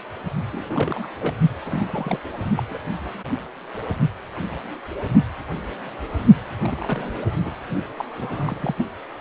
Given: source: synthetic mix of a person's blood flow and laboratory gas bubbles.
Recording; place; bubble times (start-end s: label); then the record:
Doppler ultrasound of blood flow; precordium
0.53-1.06 s: bubbles
1.20-1.33 s: bubbles
1.65-2.19 s: bubbles
2.57-2.62 s: bubbles
2.71-2.78 s: bubbles
6.62-7.26 s: bubbles
7.41-7.52 s: bubbles
7.96-8.04 s: bubbles
8.18-8.74 s: bubbles
8.77-8.89 s: bubbles
From the record:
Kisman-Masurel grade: 221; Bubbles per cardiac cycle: several, 3 to 8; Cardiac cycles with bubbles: 10 to 50%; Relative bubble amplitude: barely perceptible (0.100 to 0.250); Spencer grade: 2 (many but less than half of the cardiac periods contain bubble signals, singularly or in groups); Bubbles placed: only in the low amplitude regions of the cardiac cycle